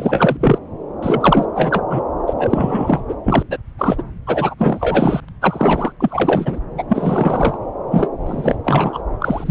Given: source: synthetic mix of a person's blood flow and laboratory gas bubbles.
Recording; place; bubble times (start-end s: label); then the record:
Doppler ultrasound of blood flow; subclavian vein
0.00-0.37 s: bubbles
0.40-0.58 s: bubbles
1.02-1.45 s: bubbles
1.55-1.82 s: bubbles
1.89-2.02 s: bubbles
2.28-2.33 s: bubbles
2.38-3.01 s: bubbles
3.08-3.15 s: bubbles
3.24-3.43 s: bubbles
3.50-3.58 s: bubbles
3.78-4.02 s: bubbles
4.26-4.54 s: bubbles
4.57-5.21 s: bubbles
5.42-5.93 s: bubbles
6.00-6.60 s: bubbles
6.77-6.83 s: bubbles
6.88-7.57 s: bubbles
7.91-8.08 s: bubbles
8.27-8.55 s: bubbles
8.64-9.02 s: bubbles
9.20-9.51 s: bubbles
From the record:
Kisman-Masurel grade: 343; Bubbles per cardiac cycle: rolling drumbeat, 9 or more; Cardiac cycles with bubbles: 100%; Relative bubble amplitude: loud (0.450 to 0.775); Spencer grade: 3 (all of the cardiac periods contain showers or single bubble signals, but not dominating or overriding the cardiac motion signals); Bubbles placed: anywhere in the cardiac cycle